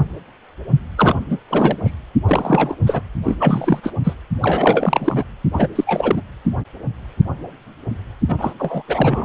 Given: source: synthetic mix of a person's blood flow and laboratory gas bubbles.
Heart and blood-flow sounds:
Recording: Doppler ultrasound of blood flow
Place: precordium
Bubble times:
0.97-1.15 s: bubbles
1.29-1.38 s: bubbles
1.49-1.95 s: bubbles
2.27-2.77 s: bubbles
2.87-3.01 s: bubbles
3.24-3.36 s: bubbles
3.39-3.80 s: bubbles
3.83-3.92 s: bubbles
4.04-4.16 s: bubbles
4.42-5.25 s: bubbles
5.53-5.69 s: bubbles
5.75-6.22 s: bubbles
8.29-8.54 s: bubbles
8.59-8.82 s: bubbles
8.88-9.25 s: bubbles
From the record:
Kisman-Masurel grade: 333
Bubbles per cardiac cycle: rolling drumbeat, 9 or more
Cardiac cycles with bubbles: 50 to 99%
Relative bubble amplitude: loud (0.450 to 0.775)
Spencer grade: 3 (all of the cardiac periods contain showers or single bubble signals, but not dominating or overriding the cardiac motion signals)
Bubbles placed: anywhere in the cardiac cycle

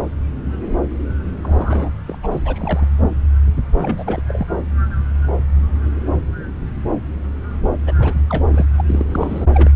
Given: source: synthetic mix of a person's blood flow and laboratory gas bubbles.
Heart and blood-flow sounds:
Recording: Doppler ultrasound of blood flow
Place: subclavian vein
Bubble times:
1.43-1.92 s: bubbles
2.08-2.17 s: bubbles
2.23-2.27 s: bubbles
2.31-2.41 s: bubbles
2.45-2.86 s: bubbles
3.74-4.22 s: bubbles
4.28-4.46 s: bubbles
7.86-7.93 s: bubbles
7.99-8.22 s: bubbles
8.29-8.44 s: bubbles
8.51-8.66 s: bubbles
8.77-8.81 s: bubbles
8.88-9.45 s: bubbles
9.53-9.70 s: bubbles
From the record:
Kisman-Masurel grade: 332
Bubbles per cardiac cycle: rolling drumbeat, 9 or more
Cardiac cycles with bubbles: 50 to 99%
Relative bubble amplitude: moderate (0.250 to 0.450)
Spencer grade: 3 (all of the cardiac periods contain showers or single bubble signals, but not dominating or overriding the cardiac motion signals)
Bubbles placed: anywhere in the cardiac cycle

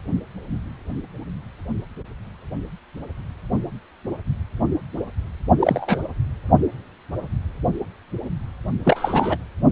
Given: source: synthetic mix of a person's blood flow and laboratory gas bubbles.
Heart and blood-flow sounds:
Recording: Doppler ultrasound of blood flow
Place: precordium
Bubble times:
5.59-5.99 s: bubbles
8.85-9.37 s: bubbles
From the record:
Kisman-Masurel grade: 222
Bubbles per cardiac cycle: several, 3 to 8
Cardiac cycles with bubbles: 10 to 50%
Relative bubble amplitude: moderate (0.250 to 0.450)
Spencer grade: 2 (many but less than half of the cardiac periods contain bubble signals, singularly or in groups)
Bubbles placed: only in the low amplitude regions of the cardiac cycle

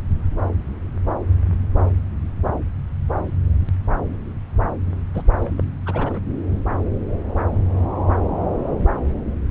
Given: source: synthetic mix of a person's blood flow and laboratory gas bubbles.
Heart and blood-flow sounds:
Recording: Doppler ultrasound of blood flow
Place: subclavian vein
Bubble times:
5.13-5.22 s: bubbles
5.38-5.52 s: bubbles
5.57-5.63 s: bubbles
5.86-6.20 s: bubbles
From the record:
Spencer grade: 1 (occasional bubble signal discernible with the cardiac motion signal, with majority of cardiac periods free of bubbles)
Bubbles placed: anywhere in the cardiac cycle

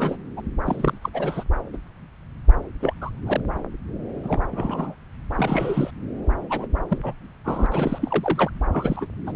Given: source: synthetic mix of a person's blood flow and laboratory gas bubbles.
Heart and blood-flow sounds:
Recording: Doppler ultrasound of blood flow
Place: subclavian vein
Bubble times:
0.00-0.17 s: bubbles
0.36-0.42 s: bubbles
0.66-0.97 s: bubbles
1.01-1.09 s: bubbles
1.13-1.44 s: bubbles
1.73-1.77 s: bubbles
2.80-2.94 s: bubbles
3.01-3.10 s: bubbles
3.26-3.40 s: bubbles
4.23-4.39 s: bubbles
4.51-4.95 s: bubbles
5.36-5.91 s: bubbles
6.49-6.66 s: bubbles
6.88-6.99 s: bubbles
7.03-7.13 s: bubbles
7.45-7.67 s: bubbles
7.71-8.51 s: bubbles
8.72-9.06 s: bubbles
9.27-9.32 s: bubbles
From the record:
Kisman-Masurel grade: 232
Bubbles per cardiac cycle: several, 3 to 8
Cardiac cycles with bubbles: 50 to 99%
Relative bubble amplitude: moderate (0.250 to 0.450)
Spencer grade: 3 (all of the cardiac periods contain showers or single bubble signals, but not dominating or overriding the cardiac motion signals)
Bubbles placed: anywhere in the cardiac cycle

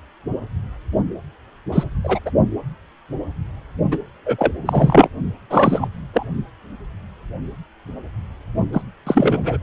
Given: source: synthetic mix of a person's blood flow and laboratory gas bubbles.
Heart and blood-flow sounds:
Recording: Doppler ultrasound of blood flow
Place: precordium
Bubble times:
1.72-1.84 s: bubbles
2.03-2.19 s: bubbles
2.26-2.31 s: bubbles
3.91-3.99 s: bubbles
4.25-4.52 s: bubbles
4.65-5.08 s: bubbles
5.50-5.88 s: bubbles
6.13-6.26 s: bubbles
8.73-8.82 s: bubbles
9.07-9.57 s: bubbles
From the record:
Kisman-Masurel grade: 233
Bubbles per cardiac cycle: several, 3 to 8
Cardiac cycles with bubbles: 50 to 99%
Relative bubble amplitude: loud (0.450 to 0.775)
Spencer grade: 3 (all of the cardiac periods contain showers or single bubble signals, but not dominating or overriding the cardiac motion signals)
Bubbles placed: only in the low amplitude regions of the cardiac cycle

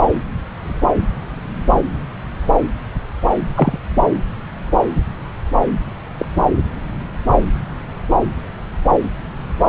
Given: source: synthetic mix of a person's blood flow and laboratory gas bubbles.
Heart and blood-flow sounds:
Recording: Doppler ultrasound of blood flow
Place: subclavian vein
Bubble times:
3.54-3.79 s: bubbles
6.18-6.25 s: bubbles
From the record:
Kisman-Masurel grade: 123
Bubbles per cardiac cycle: 1 to 2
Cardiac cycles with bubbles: 10 to 50%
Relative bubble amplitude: loud (0.450 to 0.775)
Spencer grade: 2 (many but less than half of the cardiac periods contain bubble signals, singularly or in groups)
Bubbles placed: anywhere in the cardiac cycle

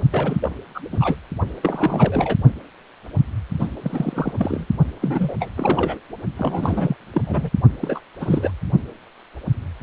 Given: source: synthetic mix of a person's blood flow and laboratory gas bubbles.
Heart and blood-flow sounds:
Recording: Doppler ultrasound of blood flow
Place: precordium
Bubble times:
0.11-0.38 s: bubbles
0.42-0.48 s: bubbles
0.74-0.80 s: bubbles
0.92-1.16 s: bubbles
1.62-2.37 s: bubbles
3.59-3.68 s: bubbles
3.83-4.65 s: bubbles
5.01-5.35 s: bubbles
5.40-5.49 s: bubbles
5.56-6.00 s: bubbles
6.36-6.96 s: bubbles
7.13-7.22 s: bubbles
7.25-7.50 s: bubbles
7.81-8.00 s: bubbles
8.20-8.52 s: bubbles
From the record:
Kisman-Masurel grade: 332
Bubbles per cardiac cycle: rolling drumbeat, 9 or more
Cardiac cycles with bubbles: 50 to 99%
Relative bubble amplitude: moderate (0.250 to 0.450)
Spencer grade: 3 (all of the cardiac periods contain showers or single bubble signals, but not dominating or overriding the cardiac motion signals)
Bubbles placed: only in the low amplitude regions of the cardiac cycle

